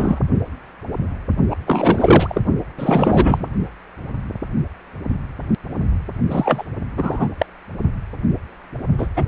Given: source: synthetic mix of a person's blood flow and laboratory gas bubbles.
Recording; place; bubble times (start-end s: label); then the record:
Doppler ultrasound of blood flow; precordium
0.00-0.20 s: bubbles
1.50-1.56 s: bubbles
1.67-2.42 s: bubbles
2.78-3.50 s: bubbles
6.29-6.67 s: bubbles
6.96-7.28 s: bubbles
7.38-7.46 s: bubbles
8.98-9.07 s: bubbles
9.16-9.24 s: bubbles
From the record:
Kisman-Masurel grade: 333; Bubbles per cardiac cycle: rolling drumbeat, 9 or more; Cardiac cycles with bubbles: 50 to 99%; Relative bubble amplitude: loud (0.450 to 0.775); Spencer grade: 3 (all of the cardiac periods contain showers or single bubble signals, but not dominating or overriding the cardiac motion signals); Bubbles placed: only in the low amplitude regions of the cardiac cycle